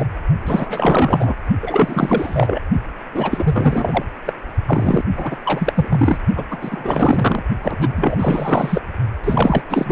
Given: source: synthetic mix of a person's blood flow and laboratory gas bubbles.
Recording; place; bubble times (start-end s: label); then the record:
Doppler ultrasound of blood flow; precordium
0.00-0.08 s: bubbles
0.46-1.35 s: bubbles
1.61-2.62 s: bubbles
3.14-4.04 s: bubbles
4.26-4.33 s: bubbles
4.66-5.03 s: bubbles
5.15-5.37 s: bubbles
5.45-5.73 s: bubbles
5.75-6.18 s: bubbles
6.36-6.44 s: bubbles
6.50-6.58 s: bubbles
6.61-7.43 s: bubbles
7.63-8.82 s: bubbles
9.24-9.63 s: bubbles
9.69-9.92 s: bubbles
From the record:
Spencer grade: 4 (maximum detectable bubble signal sounding continuously throughout systole and diastole of every cardiac period, and overriding the amplitude of the normal cardiac signals); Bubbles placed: only in the low amplitude regions of the cardiac cycle